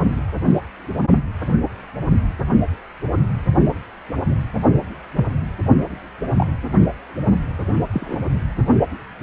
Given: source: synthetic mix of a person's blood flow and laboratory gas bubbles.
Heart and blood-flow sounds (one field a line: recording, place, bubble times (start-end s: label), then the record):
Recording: Doppler ultrasound of blood flow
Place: precordium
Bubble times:
5.16-5.25 s: bubbles
6.37-6.46 s: bubbles
7.93-8.17 s: bubbles
From the record:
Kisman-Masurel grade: 122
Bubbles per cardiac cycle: 1 to 2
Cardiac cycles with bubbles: 10 to 50%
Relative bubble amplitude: moderate (0.250 to 0.450)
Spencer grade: 2 (many but less than half of the cardiac periods contain bubble signals, singularly or in groups)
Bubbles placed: anywhere in the cardiac cycle